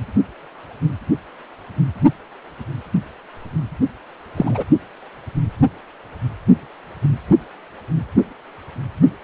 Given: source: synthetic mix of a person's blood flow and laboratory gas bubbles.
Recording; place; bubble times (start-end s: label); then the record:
Doppler ultrasound of blood flow; precordium
4.36-4.63 s: bubbles
From the record:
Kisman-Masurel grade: 113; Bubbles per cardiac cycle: 1 to 2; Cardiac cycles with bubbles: 1 to 10%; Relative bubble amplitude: loud (0.450 to 0.775); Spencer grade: 1 (occasional bubble signal discernible with the cardiac motion signal, with majority of cardiac periods free of bubbles); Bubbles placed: only in the low amplitude regions of the cardiac cycle